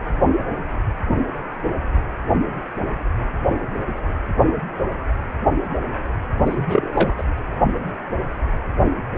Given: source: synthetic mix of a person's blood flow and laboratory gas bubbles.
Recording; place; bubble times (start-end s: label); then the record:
Doppler ultrasound of blood flow; precordium
6.46-6.91 s: bubbles
6.94-7.13 s: bubbles
7.18-7.23 s: bubbles
From the record:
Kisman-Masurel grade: 212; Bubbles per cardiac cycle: several, 3 to 8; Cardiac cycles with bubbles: 1 to 10%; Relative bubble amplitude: moderate (0.250 to 0.450); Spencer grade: 1 (occasional bubble signal discernible with the cardiac motion signal, with majority of cardiac periods free of bubbles); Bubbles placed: anywhere in the cardiac cycle